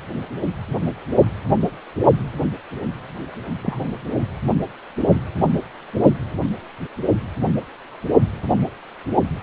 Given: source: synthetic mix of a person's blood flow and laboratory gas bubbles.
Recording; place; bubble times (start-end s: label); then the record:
Doppler ultrasound of blood flow; precordium
3.61-3.88 s: bubbles
From the record:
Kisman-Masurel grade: 112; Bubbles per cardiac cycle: 1 to 2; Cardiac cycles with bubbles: 1 to 10%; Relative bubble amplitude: moderate (0.250 to 0.450); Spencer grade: 1 (occasional bubble signal discernible with the cardiac motion signal, with majority of cardiac periods free of bubbles); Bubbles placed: only in the low amplitude regions of the cardiac cycle